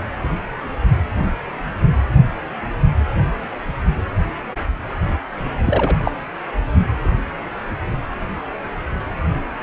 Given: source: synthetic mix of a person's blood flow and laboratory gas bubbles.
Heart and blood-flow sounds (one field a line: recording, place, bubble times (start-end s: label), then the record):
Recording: Doppler ultrasound of blood flow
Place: precordium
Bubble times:
5.64-5.96 s: bubbles
6.05-6.11 s: bubbles
7.04-7.09 s: bubbles
From the record:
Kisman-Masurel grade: 222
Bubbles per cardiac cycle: several, 3 to 8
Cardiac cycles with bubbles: 10 to 50%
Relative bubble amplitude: moderate (0.250 to 0.450)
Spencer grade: 2 (many but less than half of the cardiac periods contain bubble signals, singularly or in groups)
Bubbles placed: anywhere in the cardiac cycle